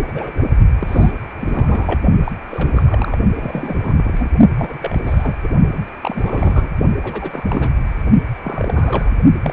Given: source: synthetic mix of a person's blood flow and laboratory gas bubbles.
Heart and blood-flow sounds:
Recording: Doppler ultrasound of blood flow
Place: precordium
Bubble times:
0.07-0.12 s: bubbles
0.14-0.48 s: bubbles
0.79-1.11 s: bubbles
1.41-2.01 s: bubbles
2.24-2.32 s: bubbles
2.50-3.18 s: bubbles
3.37-4.29 s: bubbles
4.58-5.01 s: bubbles
5.06-5.35 s: bubbles
5.43-5.48 s: bubbles
5.72-5.79 s: bubbles
6.03-6.69 s: bubbles
7.03-7.71 s: bubbles
8.43-9.11 s: bubbles
9.42-9.53 s: bubbles
From the record:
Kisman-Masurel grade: 342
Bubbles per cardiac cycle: rolling drumbeat, 9 or more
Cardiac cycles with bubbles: 100%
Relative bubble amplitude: moderate (0.250 to 0.450)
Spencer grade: 3 (all of the cardiac periods contain showers or single bubble signals, but not dominating or overriding the cardiac motion signals)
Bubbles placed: only in the low amplitude regions of the cardiac cycle

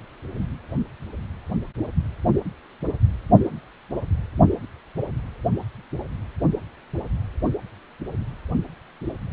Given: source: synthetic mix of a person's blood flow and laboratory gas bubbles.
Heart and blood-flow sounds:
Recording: Doppler ultrasound of blood flow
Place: precordium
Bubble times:
no bubbles
From the record:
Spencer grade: 0 (complete lack of bubble signals)

